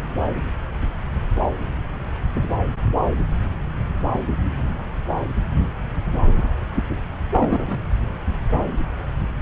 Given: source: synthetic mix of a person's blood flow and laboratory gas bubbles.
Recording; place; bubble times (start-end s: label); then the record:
Doppler ultrasound of blood flow; subclavian vein
7.32-7.83 s: bubbles
From the record:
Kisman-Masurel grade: 112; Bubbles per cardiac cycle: 1 to 2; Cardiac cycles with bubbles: 1 to 10%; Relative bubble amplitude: moderate (0.250 to 0.450); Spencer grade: 1 (occasional bubble signal discernible with the cardiac motion signal, with majority of cardiac periods free of bubbles); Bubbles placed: anywhere in the cardiac cycle